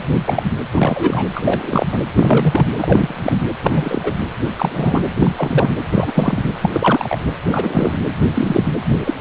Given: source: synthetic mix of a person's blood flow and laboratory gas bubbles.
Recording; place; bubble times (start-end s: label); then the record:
Doppler ultrasound of blood flow; precordium
0.18-0.52 s: bubbles
0.73-1.28 s: bubbles
1.33-1.86 s: bubbles
1.91-1.99 s: bubbles
2.16-2.67 s: bubbles
2.78-3.38 s: bubbles
3.62-4.15 s: bubbles
4.56-5.02 s: bubbles
5.19-5.31 s: bubbles
5.36-5.71 s: bubbles
5.91-6.11 s: bubbles
6.14-6.43 s: bubbles
6.61-7.18 s: bubbles
7.50-7.98 s: bubbles
8.34-8.63 s: bubbles
8.90-9.14 s: bubbles
9.17-9.21 s: bubbles
From the record:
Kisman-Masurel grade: 243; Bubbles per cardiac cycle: several, 3 to 8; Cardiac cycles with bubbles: 100%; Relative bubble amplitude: loud (0.450 to 0.775); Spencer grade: 3 (all of the cardiac periods contain showers or single bubble signals, but not dominating or overriding the cardiac motion signals); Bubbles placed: anywhere in the cardiac cycle